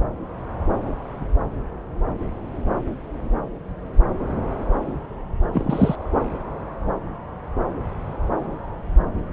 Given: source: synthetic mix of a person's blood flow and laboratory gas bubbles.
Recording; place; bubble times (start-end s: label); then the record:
Doppler ultrasound of blood flow; subclavian vein
5.53-5.96 s: bubbles
From the record:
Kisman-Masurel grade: 113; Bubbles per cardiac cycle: 1 to 2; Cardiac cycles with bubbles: 1 to 10%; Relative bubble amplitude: loud (0.450 to 0.775); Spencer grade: 1 (occasional bubble signal discernible with the cardiac motion signal, with majority of cardiac periods free of bubbles); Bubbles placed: anywhere in the cardiac cycle